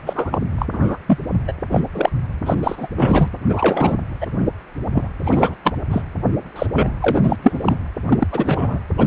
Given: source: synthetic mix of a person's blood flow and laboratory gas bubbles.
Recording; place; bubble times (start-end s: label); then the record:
Doppler ultrasound of blood flow; precordium
0.07-0.38 s: bubbles
0.58-0.66 s: bubbles
0.72-0.97 s: bubbles
1.06-1.18 s: bubbles
1.48-1.54 s: bubbles
1.71-1.81 s: bubbles
1.93-2.10 s: bubbles
2.46-2.54 s: bubbles
2.62-2.88 s: bubbles
2.96-3.28 s: bubbles
3.49-3.98 s: bubbles
4.20-4.27 s: bubbles
4.38-4.47 s: bubbles
4.92-5.08 s: bubbles
5.23-5.55 s: bubbles
5.63-5.75 s: bubbles
5.90-6.02 s: bubbles
6.55-6.67 s: bubbles
6.73-6.92 s: bubbles
7.00-7.78 s: bubbles
8.08-8.27 s: bubbles
8.32-8.79 s: bubbles
8.97-9.07 s: bubbles
From the record:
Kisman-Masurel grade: 243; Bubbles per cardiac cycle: several, 3 to 8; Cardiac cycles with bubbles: 100%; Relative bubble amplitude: loud (0.450 to 0.775); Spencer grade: 3 (all of the cardiac periods contain showers or single bubble signals, but not dominating or overriding the cardiac motion signals); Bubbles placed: anywhere in the cardiac cycle